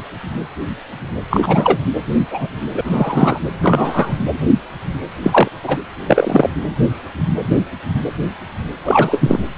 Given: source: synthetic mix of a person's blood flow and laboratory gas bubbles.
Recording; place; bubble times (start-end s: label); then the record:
Doppler ultrasound of blood flow; precordium
1.30-1.79 s: bubbles
2.31-2.49 s: bubbles
2.75-2.81 s: bubbles
2.84-3.40 s: bubbles
3.62-4.19 s: bubbles
5.23-5.49 s: bubbles
5.64-5.78 s: bubbles
6.07-6.50 s: bubbles
8.84-9.39 s: bubbles
From the record:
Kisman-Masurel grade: 223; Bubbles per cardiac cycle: several, 3 to 8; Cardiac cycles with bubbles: 10 to 50%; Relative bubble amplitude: loud (0.450 to 0.775); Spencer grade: 2 (many but less than half of the cardiac periods contain bubble signals, singularly or in groups); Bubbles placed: anywhere in the cardiac cycle